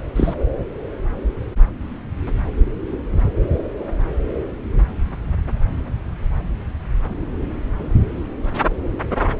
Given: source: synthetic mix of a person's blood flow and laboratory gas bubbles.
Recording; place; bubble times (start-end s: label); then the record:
Doppler ultrasound of blood flow; subclavian vein
0.15-0.34 s: bubbles
From the record:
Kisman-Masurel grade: 112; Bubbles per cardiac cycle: 1 to 2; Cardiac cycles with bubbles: 1 to 10%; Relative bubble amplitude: moderate (0.250 to 0.450); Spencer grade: 1 (occasional bubble signal discernible with the cardiac motion signal, with majority of cardiac periods free of bubbles); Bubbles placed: anywhere in the cardiac cycle